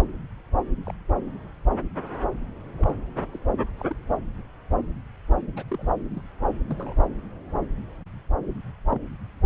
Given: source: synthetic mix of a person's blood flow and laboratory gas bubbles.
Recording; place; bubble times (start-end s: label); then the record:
Doppler ultrasound of blood flow; subclavian vein
0.87-0.92 s: bubbles
2.78-2.94 s: bubbles
3.15-3.20 s: bubbles
3.32-3.39 s: bubbles
3.79-3.85 s: bubbles
3.89-3.96 s: bubbles
5.56-5.63 s: bubbles
5.68-5.91 s: bubbles
6.14-6.22 s: bubbles
6.68-6.93 s: bubbles
8.91-9.01 s: bubbles
From the record:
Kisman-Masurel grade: 121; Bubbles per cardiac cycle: 1 to 2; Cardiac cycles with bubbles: 10 to 50%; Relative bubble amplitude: barely perceptible (0.100 to 0.250); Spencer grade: 2 (many but less than half of the cardiac periods contain bubble signals, singularly or in groups); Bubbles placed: anywhere in the cardiac cycle